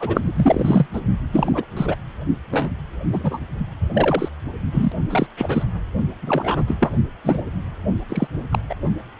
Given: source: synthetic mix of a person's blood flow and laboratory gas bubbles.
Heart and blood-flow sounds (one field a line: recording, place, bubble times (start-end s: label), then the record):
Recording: Doppler ultrasound of blood flow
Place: precordium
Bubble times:
0.00-0.86 s: bubbles
0.93-1.00 s: bubbles
1.32-1.65 s: bubbles
1.77-1.96 s: bubbles
2.51-2.69 s: bubbles
3.09-3.42 s: bubbles
3.93-4.29 s: bubbles
4.72-4.92 s: bubbles
5.10-5.27 s: bubbles
5.38-5.63 s: bubbles
6.22-6.90 s: bubbles
7.24-7.42 s: bubbles
8.08-8.28 s: bubbles
8.51-8.58 s: bubbles
8.69-8.75 s: bubbles
From the record:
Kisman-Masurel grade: 233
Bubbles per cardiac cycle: several, 3 to 8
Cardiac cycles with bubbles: 50 to 99%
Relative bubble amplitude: loud (0.450 to 0.775)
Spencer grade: 3 (all of the cardiac periods contain showers or single bubble signals, but not dominating or overriding the cardiac motion signals)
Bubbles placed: only in the low amplitude regions of the cardiac cycle